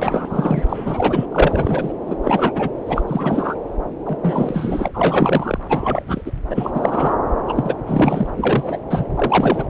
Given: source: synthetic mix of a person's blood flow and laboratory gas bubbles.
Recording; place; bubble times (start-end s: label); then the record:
Doppler ultrasound of blood flow; subclavian vein
0.00-0.63 s: bubbles
0.67-1.25 s: bubbles
1.32-1.93 s: bubbles
2.06-2.17 s: bubbles
2.23-2.69 s: bubbles
2.85-3.04 s: bubbles
3.07-3.55 s: bubbles
4.05-4.18 s: bubbles
4.22-4.88 s: bubbles
4.93-5.58 s: bubbles
5.69-6.04 s: bubbles
6.07-6.21 s: bubbles
6.25-6.31 s: bubbles
6.50-6.71 s: bubbles
6.74-7.16 s: bubbles
7.47-7.75 s: bubbles
7.86-8.30 s: bubbles
8.36-8.78 s: bubbles
8.90-9.04 s: bubbles
9.15-9.64 s: bubbles
From the record:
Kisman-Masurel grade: 343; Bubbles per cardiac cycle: rolling drumbeat, 9 or more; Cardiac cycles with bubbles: 100%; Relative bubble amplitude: loud (0.450 to 0.775); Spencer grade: 3 (all of the cardiac periods contain showers or single bubble signals, but not dominating or overriding the cardiac motion signals); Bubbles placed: anywhere in the cardiac cycle